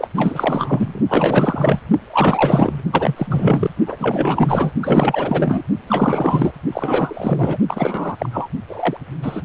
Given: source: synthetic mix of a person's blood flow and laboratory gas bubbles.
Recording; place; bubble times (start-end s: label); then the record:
Doppler ultrasound of blood flow; precordium
0.00-0.08 s: bubbles
0.16-1.00 s: bubbles
1.08-1.80 s: bubbles
2.12-2.82 s: bubbles
2.92-3.70 s: bubbles
3.85-3.96 s: bubbles
4.00-4.72 s: bubbles
4.83-5.62 s: bubbles
5.87-6.54 s: bubbles
6.72-7.58 s: bubbles
7.67-8.16 s: bubbles
8.19-8.29 s: bubbles
8.32-8.49 s: bubbles
8.69-8.97 s: bubbles
9.23-9.42 s: bubbles
From the record:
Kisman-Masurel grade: 444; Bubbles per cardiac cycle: continuous sound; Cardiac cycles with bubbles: 100%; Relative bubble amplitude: maximal (0.775 to 0.999); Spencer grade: 4 (maximum detectable bubble signal sounding continuously throughout systole and diastole of every cardiac period, and overriding the amplitude of the normal cardiac signals); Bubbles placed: only in the low amplitude regions of the cardiac cycle